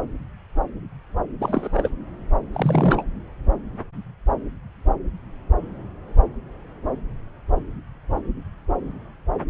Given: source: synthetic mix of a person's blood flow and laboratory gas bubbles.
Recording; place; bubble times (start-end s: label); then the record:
Doppler ultrasound of blood flow; subclavian vein
1.40-1.89 s: bubbles
2.53-3.04 s: bubbles
From the record:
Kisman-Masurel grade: 222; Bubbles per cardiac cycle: several, 3 to 8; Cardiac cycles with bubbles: 10 to 50%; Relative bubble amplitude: moderate (0.250 to 0.450); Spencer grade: 2 (many but less than half of the cardiac periods contain bubble signals, singularly or in groups); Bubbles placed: anywhere in the cardiac cycle